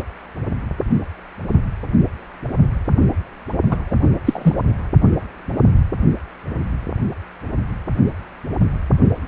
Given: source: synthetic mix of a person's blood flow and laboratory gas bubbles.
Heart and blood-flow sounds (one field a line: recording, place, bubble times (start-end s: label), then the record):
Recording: Doppler ultrasound of blood flow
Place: precordium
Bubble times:
3.70-3.77 s: bubbles
3.90-3.95 s: bubbles
4.26-4.54 s: bubbles
From the record:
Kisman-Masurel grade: 213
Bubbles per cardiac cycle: several, 3 to 8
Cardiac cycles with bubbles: 1 to 10%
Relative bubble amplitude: loud (0.450 to 0.775)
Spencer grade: 1 (occasional bubble signal discernible with the cardiac motion signal, with majority of cardiac periods free of bubbles)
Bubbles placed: only in the low amplitude regions of the cardiac cycle